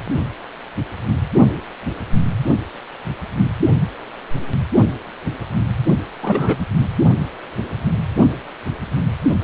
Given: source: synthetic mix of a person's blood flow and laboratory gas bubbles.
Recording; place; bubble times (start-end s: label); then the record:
Doppler ultrasound of blood flow; precordium
6.22-6.65 s: bubbles
From the record:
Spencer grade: 1 (occasional bubble signal discernible with the cardiac motion signal, with majority of cardiac periods free of bubbles); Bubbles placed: only in the low amplitude regions of the cardiac cycle